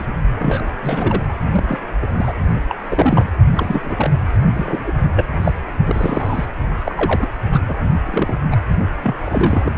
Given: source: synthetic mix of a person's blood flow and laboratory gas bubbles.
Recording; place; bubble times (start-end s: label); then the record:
Doppler ultrasound of blood flow; precordium
0.00-0.07 s: bubbles
0.39-0.71 s: bubbles
0.82-1.22 s: bubbles
1.51-1.65 s: bubbles
1.68-1.79 s: bubbles
2.02-2.06 s: bubbles
2.12-2.33 s: bubbles
2.68-2.75 s: bubbles
2.88-3.25 s: bubbles
3.56-4.11 s: bubbles
4.54-4.92 s: bubbles
5.16-5.26 s: bubbles
5.41-5.53 s: bubbles
5.86-6.46 s: bubbles
6.84-7.28 s: bubbles
7.52-7.61 s: bubbles
7.66-7.76 s: bubbles
8.07-8.37 s: bubbles
8.51-8.58 s: bubbles
9.03-9.16 s: bubbles
9.25-9.74 s: bubbles
From the record:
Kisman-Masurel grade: 242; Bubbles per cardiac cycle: several, 3 to 8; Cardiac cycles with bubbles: 100%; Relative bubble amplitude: moderate (0.250 to 0.450); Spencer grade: 3 (all of the cardiac periods contain showers or single bubble signals, but not dominating or overriding the cardiac motion signals); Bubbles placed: only in the low amplitude regions of the cardiac cycle